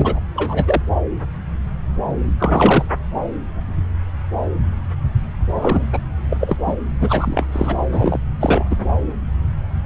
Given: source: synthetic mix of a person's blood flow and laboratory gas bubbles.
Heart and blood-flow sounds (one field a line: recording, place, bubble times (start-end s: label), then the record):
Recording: Doppler ultrasound of blood flow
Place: subclavian vein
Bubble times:
0.00-0.20 s: bubbles
0.35-0.82 s: bubbles
2.39-2.85 s: bubbles
5.55-5.87 s: bubbles
5.92-5.99 s: bubbles
6.29-6.37 s: bubbles
6.40-6.56 s: bubbles
6.65-6.75 s: bubbles
7.00-7.46 s: bubbles
7.52-7.77 s: bubbles
7.91-8.19 s: bubbles
8.40-8.63 s: bubbles
8.70-8.77 s: bubbles
From the record:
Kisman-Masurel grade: 223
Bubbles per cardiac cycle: several, 3 to 8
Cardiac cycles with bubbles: 10 to 50%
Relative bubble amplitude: loud (0.450 to 0.775)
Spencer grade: 2 (many but less than half of the cardiac periods contain bubble signals, singularly or in groups)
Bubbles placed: anywhere in the cardiac cycle